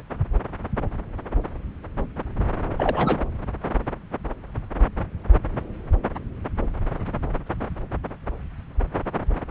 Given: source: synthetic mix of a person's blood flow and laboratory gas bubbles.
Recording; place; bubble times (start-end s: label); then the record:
Doppler ultrasound of blood flow; subclavian vein
2.73-3.25 s: bubbles
From the record:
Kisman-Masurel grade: 212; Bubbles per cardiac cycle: several, 3 to 8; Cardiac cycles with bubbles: 1 to 10%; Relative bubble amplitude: moderate (0.250 to 0.450); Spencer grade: 1 (occasional bubble signal discernible with the cardiac motion signal, with majority of cardiac periods free of bubbles); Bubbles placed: anywhere in the cardiac cycle